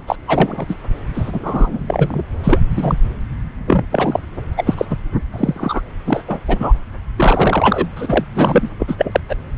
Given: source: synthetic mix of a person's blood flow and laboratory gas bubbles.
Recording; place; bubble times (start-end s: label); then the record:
Doppler ultrasound of blood flow; subclavian vein
0.07-0.16 s: bubbles
0.28-0.66 s: bubbles
0.68-0.74 s: bubbles
1.14-2.23 s: bubbles
2.44-2.62 s: bubbles
2.76-2.95 s: bubbles
3.67-3.86 s: bubbles
3.92-4.20 s: bubbles
4.57-4.75 s: bubbles
4.78-4.86 s: bubbles
4.90-4.96 s: bubbles
5.32-5.82 s: bubbles
6.07-6.24 s: bubbles
6.28-6.39 s: bubbles
6.47-6.72 s: bubbles
7.17-7.87 s: bubbles
7.96-8.24 s: bubbles
8.35-8.69 s: bubbles
8.79-9.20 s: bubbles
9.29-9.36 s: bubbles
From the record:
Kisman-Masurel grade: 243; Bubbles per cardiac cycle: several, 3 to 8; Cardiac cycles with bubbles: 100%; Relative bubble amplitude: loud (0.450 to 0.775); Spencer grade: 3 (all of the cardiac periods contain showers or single bubble signals, but not dominating or overriding the cardiac motion signals); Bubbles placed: anywhere in the cardiac cycle